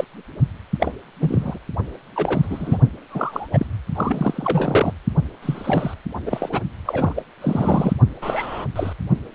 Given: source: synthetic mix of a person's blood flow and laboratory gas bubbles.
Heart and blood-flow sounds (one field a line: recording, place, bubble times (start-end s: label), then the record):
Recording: Doppler ultrasound of blood flow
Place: precordium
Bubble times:
0.00-0.05 s: bubbles
0.80-0.94 s: bubbles
1.21-1.59 s: bubbles
2.15-2.78 s: bubbles
3.08-3.49 s: bubbles
3.52-3.66 s: bubbles
3.94-4.92 s: bubbles
5.42-5.94 s: bubbles
6.25-6.49 s: bubbles
6.52-6.61 s: bubbles
6.85-7.23 s: bubbles
7.41-7.93 s: bubbles
8.21-8.65 s: bubbles
8.75-8.93 s: bubbles
From the record:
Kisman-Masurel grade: 232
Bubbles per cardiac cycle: several, 3 to 8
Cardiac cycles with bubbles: 50 to 99%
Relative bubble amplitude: moderate (0.250 to 0.450)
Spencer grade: 3 (all of the cardiac periods contain showers or single bubble signals, but not dominating or overriding the cardiac motion signals)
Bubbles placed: only in the low amplitude regions of the cardiac cycle